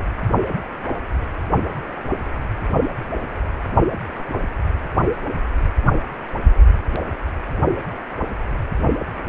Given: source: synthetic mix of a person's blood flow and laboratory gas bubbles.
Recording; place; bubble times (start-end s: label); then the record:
Doppler ultrasound of blood flow; precordium
no bubbles
From the record:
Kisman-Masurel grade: 000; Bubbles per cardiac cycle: 0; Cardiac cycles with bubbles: 0%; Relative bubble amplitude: no bubbles discernible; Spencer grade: 0 (complete lack of bubble signals)